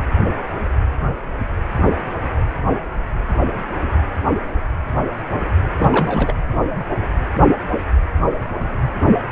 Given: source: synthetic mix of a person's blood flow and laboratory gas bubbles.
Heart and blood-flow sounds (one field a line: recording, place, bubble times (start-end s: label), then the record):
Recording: Doppler ultrasound of blood flow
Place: precordium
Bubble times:
5.76-6.39 s: bubbles
From the record:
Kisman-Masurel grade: 222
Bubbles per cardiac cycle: several, 3 to 8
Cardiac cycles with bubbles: 10 to 50%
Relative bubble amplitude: moderate (0.250 to 0.450)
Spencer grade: 2 (many but less than half of the cardiac periods contain bubble signals, singularly or in groups)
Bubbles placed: anywhere in the cardiac cycle